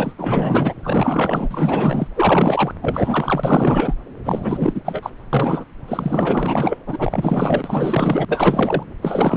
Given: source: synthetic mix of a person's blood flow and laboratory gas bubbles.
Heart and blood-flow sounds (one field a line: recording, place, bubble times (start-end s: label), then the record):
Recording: Doppler ultrasound of blood flow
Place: subclavian vein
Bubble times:
0.00-0.13 s: bubbles
0.18-0.74 s: bubbles
0.82-2.08 s: bubbles
2.14-2.74 s: bubbles
2.82-3.94 s: bubbles
4.25-4.81 s: bubbles
4.85-5.10 s: bubbles
5.33-5.65 s: bubbles
5.87-6.77 s: bubbles
6.86-8.25 s: bubbles
8.28-8.83 s: bubbles
9.02-9.37 s: bubbles
From the record:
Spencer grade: 4 (maximum detectable bubble signal sounding continuously throughout systole and diastole of every cardiac period, and overriding the amplitude of the normal cardiac signals)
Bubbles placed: anywhere in the cardiac cycle